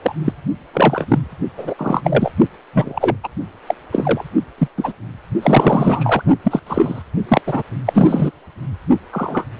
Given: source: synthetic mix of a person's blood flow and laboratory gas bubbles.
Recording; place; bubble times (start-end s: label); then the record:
Doppler ultrasound of blood flow; precordium
0.02-0.15 s: bubbles
0.24-0.33 s: bubbles
0.73-1.05 s: bubbles
1.08-1.18 s: bubbles
1.57-1.74 s: bubbles
1.78-2.02 s: bubbles
2.04-2.30 s: bubbles
2.73-3.17 s: bubbles
3.23-3.28 s: bubbles
3.67-3.75 s: bubbles
3.92-4.24 s: bubbles
4.58-4.68 s: bubbles
4.78-4.92 s: bubbles
5.42-6.22 s: bubbles
6.44-6.60 s: bubbles
6.67-7.02 s: bubbles
7.28-7.42 s: bubbles
7.46-7.62 s: bubbles
7.86-8.31 s: bubbles
9.12-9.45 s: bubbles
From the record:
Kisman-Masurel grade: 243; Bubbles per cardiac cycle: several, 3 to 8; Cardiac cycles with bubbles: 100%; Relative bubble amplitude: loud (0.450 to 0.775); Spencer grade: 3 (all of the cardiac periods contain showers or single bubble signals, but not dominating or overriding the cardiac motion signals); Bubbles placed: only in the low amplitude regions of the cardiac cycle